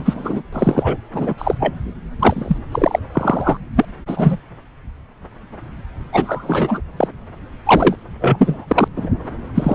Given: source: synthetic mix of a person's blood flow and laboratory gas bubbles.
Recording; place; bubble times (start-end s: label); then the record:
Doppler ultrasound of blood flow; subclavian vein
0.00-0.42 s: bubbles
0.53-0.96 s: bubbles
1.14-1.34 s: bubbles
1.38-1.55 s: bubbles
1.59-1.74 s: bubbles
2.19-2.58 s: bubbles
2.71-2.99 s: bubbles
3.12-3.57 s: bubbles
3.76-3.85 s: bubbles
4.07-4.36 s: bubbles
6.12-6.82 s: bubbles
6.97-7.08 s: bubbles
7.66-7.96 s: bubbles
8.21-8.88 s: bubbles
8.96-9.11 s: bubbles
9.54-9.75 s: bubbles
From the record:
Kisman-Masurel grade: 233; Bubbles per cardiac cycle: several, 3 to 8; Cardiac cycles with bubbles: 50 to 99%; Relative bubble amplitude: loud (0.450 to 0.775); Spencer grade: 3 (all of the cardiac periods contain showers or single bubble signals, but not dominating or overriding the cardiac motion signals); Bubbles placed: anywhere in the cardiac cycle